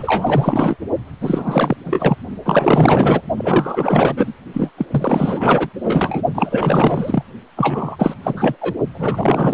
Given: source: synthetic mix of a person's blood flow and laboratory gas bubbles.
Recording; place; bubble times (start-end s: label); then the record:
Doppler ultrasound of blood flow; precordium
0.00-0.77 s: bubbles
1.21-1.76 s: bubbles
1.84-2.16 s: bubbles
2.45-3.21 s: bubbles
3.37-4.33 s: bubbles
4.53-4.71 s: bubbles
4.78-4.86 s: bubbles
4.90-5.69 s: bubbles
5.83-6.21 s: bubbles
6.34-7.23 s: bubbles
7.56-8.16 s: bubbles
8.23-8.57 s: bubbles
8.61-8.75 s: bubbles
8.94-9.54 s: bubbles
From the record:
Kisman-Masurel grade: 444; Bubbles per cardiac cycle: continuous sound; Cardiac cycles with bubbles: 100%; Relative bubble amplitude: maximal (0.775 to 0.999); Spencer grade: 4 (maximum detectable bubble signal sounding continuously throughout systole and diastole of every cardiac period, and overriding the amplitude of the normal cardiac signals); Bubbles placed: only in the low amplitude regions of the cardiac cycle